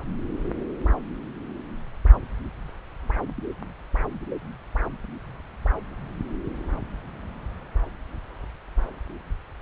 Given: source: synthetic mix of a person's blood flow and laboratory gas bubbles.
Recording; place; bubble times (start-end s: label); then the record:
Doppler ultrasound of blood flow; subclavian vein
no bubbles
From the record:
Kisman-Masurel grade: 000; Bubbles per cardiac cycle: 0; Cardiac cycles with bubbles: 0%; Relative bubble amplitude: no bubbles discernible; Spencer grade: 0 (complete lack of bubble signals)